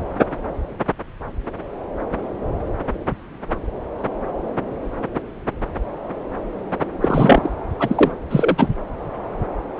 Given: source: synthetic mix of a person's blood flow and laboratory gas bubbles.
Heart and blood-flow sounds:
Doppler ultrasound of blood flow; subclavian vein
7.01-7.52 s: bubbles
7.79-8.12 s: bubbles
8.29-8.68 s: bubbles
From the record:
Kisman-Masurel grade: 223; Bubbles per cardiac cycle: several, 3 to 8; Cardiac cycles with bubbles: 10 to 50%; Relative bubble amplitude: loud (0.450 to 0.775); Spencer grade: 2 (many but less than half of the cardiac periods contain bubble signals, singularly or in groups); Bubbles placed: anywhere in the cardiac cycle

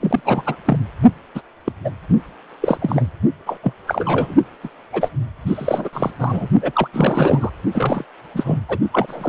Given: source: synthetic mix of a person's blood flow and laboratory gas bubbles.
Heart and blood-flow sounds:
Doppler ultrasound of blood flow; precordium
0.01-0.55 s: bubbles
0.65-0.79 s: bubbles
1.35-1.41 s: bubbles
1.66-1.72 s: bubbles
1.84-1.91 s: bubbles
2.61-2.77 s: bubbles
2.81-3.07 s: bubbles
3.46-3.58 s: bubbles
3.63-3.73 s: bubbles
3.87-4.35 s: bubbles
4.63-4.69 s: bubbles
4.92-5.11 s: bubbles
5.46-5.89 s: bubbles
5.92-6.11 s: bubbles
6.19-6.49 s: bubbles
6.62-6.88 s: bubbles
6.93-7.50 s: bubbles
7.73-8.03 s: bubbles
8.34-8.59 s: bubbles
8.68-8.78 s: bubbles
8.92-9.29 s: bubbles
From the record:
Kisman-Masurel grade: 342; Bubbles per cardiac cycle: rolling drumbeat, 9 or more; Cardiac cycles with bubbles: 100%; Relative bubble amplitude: moderate (0.250 to 0.450); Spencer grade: 3 (all of the cardiac periods contain showers or single bubble signals, but not dominating or overriding the cardiac motion signals); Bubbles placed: only in the low amplitude regions of the cardiac cycle

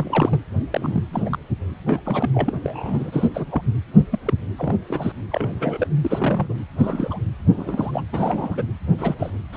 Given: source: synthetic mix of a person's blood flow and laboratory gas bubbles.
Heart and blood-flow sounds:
Doppler ultrasound of blood flow; precordium
0.00-0.41 s: bubbles
0.71-1.03 s: bubbles
1.10-1.39 s: bubbles
1.86-2.01 s: bubbles
2.04-2.30 s: bubbles
2.34-2.53 s: bubbles
2.62-3.29 s: bubbles
3.34-3.46 s: bubbles
3.50-3.62 s: bubbles
3.96-4.05 s: bubbles
4.11-4.19 s: bubbles
4.25-4.33 s: bubbles
4.56-4.76 s: bubbles
4.88-5.12 s: bubbles
5.30-5.88 s: bubbles
6.04-6.54 s: bubbles
6.77-7.19 s: bubbles
7.56-8.02 s: bubbles
8.12-8.67 s: bubbles
8.98-9.15 s: bubbles
9.19-9.30 s: bubbles
9.52-9.57 s: bubbles
From the record:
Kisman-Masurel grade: 242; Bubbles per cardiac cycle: several, 3 to 8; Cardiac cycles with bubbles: 100%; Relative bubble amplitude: moderate (0.250 to 0.450); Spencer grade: 3 (all of the cardiac periods contain showers or single bubble signals, but not dominating or overriding the cardiac motion signals); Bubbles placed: anywhere in the cardiac cycle

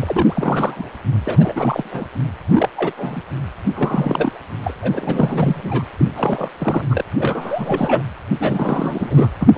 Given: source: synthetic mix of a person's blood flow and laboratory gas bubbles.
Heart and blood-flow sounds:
Doppler ultrasound of blood flow; precordium
0.00-0.89 s: bubbles
1.24-1.53 s: bubbles
1.56-2.06 s: bubbles
2.46-2.69 s: bubbles
2.76-2.92 s: bubbles
2.97-3.21 s: bubbles
3.75-4.33 s: bubbles
4.62-4.74 s: bubbles
4.82-5.84 s: bubbles
5.98-6.06 s: bubbles
6.16-6.50 s: bubbles
6.59-6.84 s: bubbles
6.89-7.04 s: bubbles
7.19-8.03 s: bubbles
8.39-9.29 s: bubbles
9.40-9.48 s: bubbles
9.54-9.58 s: bubbles
From the record:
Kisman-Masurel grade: 332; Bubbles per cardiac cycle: rolling drumbeat, 9 or more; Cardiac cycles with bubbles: 50 to 99%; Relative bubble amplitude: moderate (0.250 to 0.450); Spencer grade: 3 (all of the cardiac periods contain showers or single bubble signals, but not dominating or overriding the cardiac motion signals); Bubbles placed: anywhere in the cardiac cycle

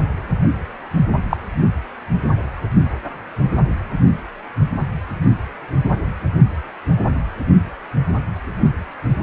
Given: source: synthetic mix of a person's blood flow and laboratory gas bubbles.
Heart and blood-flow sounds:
Doppler ultrasound of blood flow; precordium
1.29-1.37 s: bubbles
From the record:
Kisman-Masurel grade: 113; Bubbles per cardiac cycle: 1 to 2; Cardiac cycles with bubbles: 1 to 10%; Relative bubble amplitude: loud (0.450 to 0.775); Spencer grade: 1 (occasional bubble signal discernible with the cardiac motion signal, with majority of cardiac periods free of bubbles); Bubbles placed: only in the low amplitude regions of the cardiac cycle

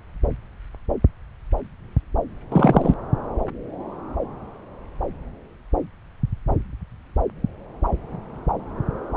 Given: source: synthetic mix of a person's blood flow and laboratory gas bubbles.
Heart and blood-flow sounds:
Doppler ultrasound of blood flow; subclavian vein
2.52-2.94 s: bubbles
From the record:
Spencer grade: 1 (occasional bubble signal discernible with the cardiac motion signal, with majority of cardiac periods free of bubbles); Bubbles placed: anywhere in the cardiac cycle

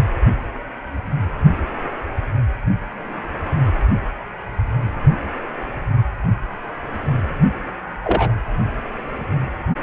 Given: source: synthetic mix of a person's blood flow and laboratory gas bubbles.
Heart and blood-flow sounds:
Doppler ultrasound of blood flow; precordium
8.04-8.34 s: bubbles
From the record:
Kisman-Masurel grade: 113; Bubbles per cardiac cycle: 1 to 2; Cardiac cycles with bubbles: 1 to 10%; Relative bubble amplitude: loud (0.450 to 0.775); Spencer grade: 1 (occasional bubble signal discernible with the cardiac motion signal, with majority of cardiac periods free of bubbles); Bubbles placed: anywhere in the cardiac cycle

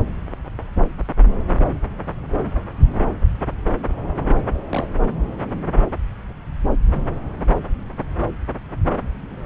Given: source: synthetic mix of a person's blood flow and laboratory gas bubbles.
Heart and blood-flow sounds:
Doppler ultrasound of blood flow; subclavian vein
4.69-4.87 s: bubbles
From the record:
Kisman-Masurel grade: 111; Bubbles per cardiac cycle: 1 to 2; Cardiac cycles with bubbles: 1 to 10%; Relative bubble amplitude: barely perceptible (0.100 to 0.250); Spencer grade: 1 (occasional bubble signal discernible with the cardiac motion signal, with majority of cardiac periods free of bubbles); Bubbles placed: anywhere in the cardiac cycle

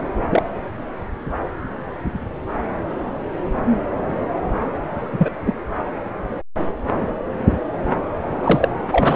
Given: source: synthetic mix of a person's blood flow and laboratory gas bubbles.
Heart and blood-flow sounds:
Doppler ultrasound of blood flow; subclavian vein
0.00-0.02 s: bubbles
0.31-0.43 s: bubbles
5.12-5.31 s: bubbles
5.46-5.53 s: bubbles
8.43-8.68 s: bubbles
8.91-9.16 s: bubbles
From the record:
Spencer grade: 2 (many but less than half of the cardiac periods contain bubble signals, singularly or in groups); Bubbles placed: anywhere in the cardiac cycle

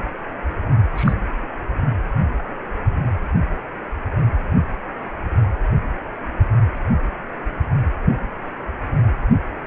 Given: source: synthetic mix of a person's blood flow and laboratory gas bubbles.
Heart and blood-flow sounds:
Doppler ultrasound of blood flow; precordium
0.95-1.13 s: bubbles
From the record:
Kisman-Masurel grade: 112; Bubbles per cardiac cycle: 1 to 2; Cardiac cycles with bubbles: 1 to 10%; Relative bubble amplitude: moderate (0.250 to 0.450); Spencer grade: 1 (occasional bubble signal discernible with the cardiac motion signal, with majority of cardiac periods free of bubbles); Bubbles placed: anywhere in the cardiac cycle

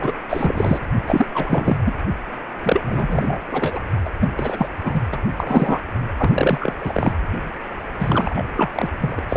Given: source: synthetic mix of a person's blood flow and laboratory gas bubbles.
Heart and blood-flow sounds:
Doppler ultrasound of blood flow; precordium
0.00-0.13 s: bubbles
0.29-0.79 s: bubbles
1.06-1.27 s: bubbles
1.33-1.77 s: bubbles
1.85-1.95 s: bubbles
2.62-2.83 s: bubbles
2.85-3.39 s: bubbles
3.52-3.79 s: bubbles
4.04-4.10 s: bubbles
4.20-4.29 s: bubbles
4.38-4.68 s: bubbles
4.84-5.00 s: bubbles
5.12-5.18 s: bubbles
5.37-5.80 s: bubbles
6.17-6.72 s: bubbles
6.83-7.12 s: bubbles
7.98-8.42 s: bubbles
8.56-8.71 s: bubbles
8.75-8.88 s: bubbles
9.01-9.19 s: bubbles
9.28-9.37 s: bubbles
From the record:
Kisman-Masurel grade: 343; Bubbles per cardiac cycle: rolling drumbeat, 9 or more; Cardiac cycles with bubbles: 100%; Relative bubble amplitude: loud (0.450 to 0.775); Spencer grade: 3 (all of the cardiac periods contain showers or single bubble signals, but not dominating or overriding the cardiac motion signals); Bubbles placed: anywhere in the cardiac cycle

